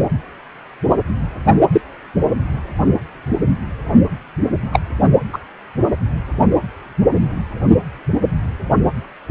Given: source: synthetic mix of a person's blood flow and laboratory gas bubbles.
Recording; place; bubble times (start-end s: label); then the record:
Doppler ultrasound of blood flow; precordium
1.72-1.81 s: bubbles
4.72-4.80 s: bubbles
5.33-5.38 s: bubbles
From the record:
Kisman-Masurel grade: 123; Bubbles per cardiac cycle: 1 to 2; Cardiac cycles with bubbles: 10 to 50%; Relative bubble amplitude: loud (0.450 to 0.775); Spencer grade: 2 (many but less than half of the cardiac periods contain bubble signals, singularly or in groups); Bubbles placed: only in the low amplitude regions of the cardiac cycle